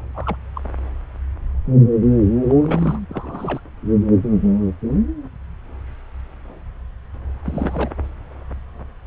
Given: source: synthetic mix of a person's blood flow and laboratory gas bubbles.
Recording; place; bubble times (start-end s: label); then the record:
Doppler ultrasound of blood flow; subclavian vein
0.15-0.36 s: bubbles
0.55-0.61 s: bubbles
2.48-2.56 s: bubbles
2.59-3.00 s: bubbles
3.09-3.60 s: bubbles
7.44-7.91 s: bubbles
From the record:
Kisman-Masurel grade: 221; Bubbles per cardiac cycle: several, 3 to 8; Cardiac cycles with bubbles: 10 to 50%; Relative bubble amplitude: barely perceptible (0.100 to 0.250); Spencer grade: 2 (many but less than half of the cardiac periods contain bubble signals, singularly or in groups); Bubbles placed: anywhere in the cardiac cycle